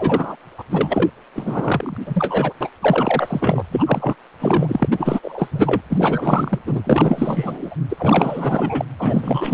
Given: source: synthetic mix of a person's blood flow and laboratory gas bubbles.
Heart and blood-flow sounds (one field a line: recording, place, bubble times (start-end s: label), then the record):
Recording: Doppler ultrasound of blood flow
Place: precordium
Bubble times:
0.00-0.36 s: bubbles
0.57-0.64 s: bubbles
0.70-1.10 s: bubbles
1.34-1.97 s: bubbles
2.06-2.53 s: bubbles
2.60-2.70 s: bubbles
2.81-3.64 s: bubbles
3.71-4.15 s: bubbles
4.38-4.88 s: bubbles
4.91-5.20 s: bubbles
5.22-5.81 s: bubbles
5.89-6.59 s: bubbles
6.66-7.75 s: bubbles
7.89-8.85 s: bubbles
8.98-9.54 s: bubbles
From the record:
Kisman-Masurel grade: 444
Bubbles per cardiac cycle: continuous sound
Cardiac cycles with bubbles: 100%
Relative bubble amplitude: maximal (0.775 to 0.999)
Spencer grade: 4 (maximum detectable bubble signal sounding continuously throughout systole and diastole of every cardiac period, and overriding the amplitude of the normal cardiac signals)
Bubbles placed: anywhere in the cardiac cycle